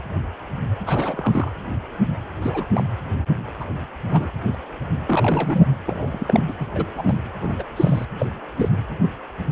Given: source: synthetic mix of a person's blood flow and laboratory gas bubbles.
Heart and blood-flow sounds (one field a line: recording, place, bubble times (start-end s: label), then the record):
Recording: Doppler ultrasound of blood flow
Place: precordium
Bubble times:
0.86-1.52 s: bubbles
2.42-2.83 s: bubbles
3.60-3.65 s: bubbles
4.09-4.31 s: bubbles
4.54-4.57 s: bubbles
5.07-5.66 s: bubbles
5.86-6.56 s: bubbles
6.59-6.67 s: bubbles
6.75-6.85 s: bubbles
6.96-7.19 s: bubbles
7.42-7.55 s: bubbles
7.58-7.63 s: bubbles
7.76-8.05 s: bubbles
8.19-8.26 s: bubbles
8.56-8.69 s: bubbles
From the record:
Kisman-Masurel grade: 232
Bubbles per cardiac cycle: several, 3 to 8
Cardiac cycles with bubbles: 50 to 99%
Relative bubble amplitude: moderate (0.250 to 0.450)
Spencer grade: 3 (all of the cardiac periods contain showers or single bubble signals, but not dominating or overriding the cardiac motion signals)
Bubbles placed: anywhere in the cardiac cycle